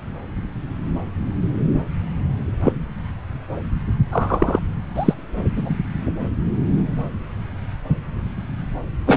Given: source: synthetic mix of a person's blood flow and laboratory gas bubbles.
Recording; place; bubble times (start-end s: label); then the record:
Doppler ultrasound of blood flow; subclavian vein
2.64-2.73 s: bubbles
4.12-4.59 s: bubbles
4.95-5.14 s: bubbles
5.56-5.77 s: bubbles
9.06-9.17 s: bubbles
From the record:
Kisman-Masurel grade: 123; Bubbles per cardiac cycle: 1 to 2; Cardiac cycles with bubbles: 10 to 50%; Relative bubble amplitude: loud (0.450 to 0.775); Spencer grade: 2 (many but less than half of the cardiac periods contain bubble signals, singularly or in groups); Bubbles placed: anywhere in the cardiac cycle